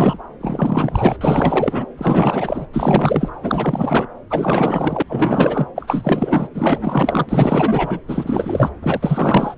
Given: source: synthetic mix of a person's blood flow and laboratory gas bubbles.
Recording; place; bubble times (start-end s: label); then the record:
Doppler ultrasound of blood flow; subclavian vein
0.00-0.18 s: bubbles
0.40-1.17 s: bubbles
1.21-1.85 s: bubbles
1.97-2.67 s: bubbles
2.73-3.31 s: bubbles
3.43-4.06 s: bubbles
4.30-5.02 s: bubbles
5.07-5.67 s: bubbles
5.75-6.48 s: bubbles
6.54-7.99 s: bubbles
8.07-8.70 s: bubbles
8.82-9.54 s: bubbles
From the record:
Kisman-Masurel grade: 444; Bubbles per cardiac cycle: continuous sound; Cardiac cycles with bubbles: 100%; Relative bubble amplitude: maximal (0.775 to 0.999); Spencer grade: 4 (maximum detectable bubble signal sounding continuously throughout systole and diastole of every cardiac period, and overriding the amplitude of the normal cardiac signals); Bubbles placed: anywhere in the cardiac cycle